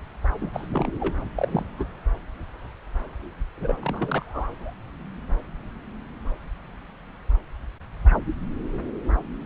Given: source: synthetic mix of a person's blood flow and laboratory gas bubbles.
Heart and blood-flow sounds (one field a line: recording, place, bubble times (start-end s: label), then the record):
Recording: Doppler ultrasound of blood flow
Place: subclavian vein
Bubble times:
0.41-0.49 s: bubbles
0.53-0.67 s: bubbles
0.72-0.92 s: bubbles
1.00-1.15 s: bubbles
1.36-1.64 s: bubbles
1.78-1.85 s: bubbles
3.57-4.22 s: bubbles
4.25-4.73 s: bubbles
From the record:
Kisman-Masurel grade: 221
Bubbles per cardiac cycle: several, 3 to 8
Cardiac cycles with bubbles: 10 to 50%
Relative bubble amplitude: barely perceptible (0.100 to 0.250)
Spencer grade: 2 (many but less than half of the cardiac periods contain bubble signals, singularly or in groups)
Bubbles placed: anywhere in the cardiac cycle